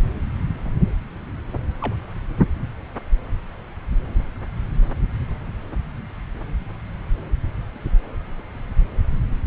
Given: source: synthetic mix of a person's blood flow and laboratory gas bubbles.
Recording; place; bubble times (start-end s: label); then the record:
Doppler ultrasound of blood flow; subclavian vein
1.81-1.95 s: bubbles
From the record:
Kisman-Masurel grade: 111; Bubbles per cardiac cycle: 1 to 2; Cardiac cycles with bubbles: 1 to 10%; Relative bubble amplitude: barely perceptible (0.100 to 0.250); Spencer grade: 1 (occasional bubble signal discernible with the cardiac motion signal, with majority of cardiac periods free of bubbles); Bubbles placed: anywhere in the cardiac cycle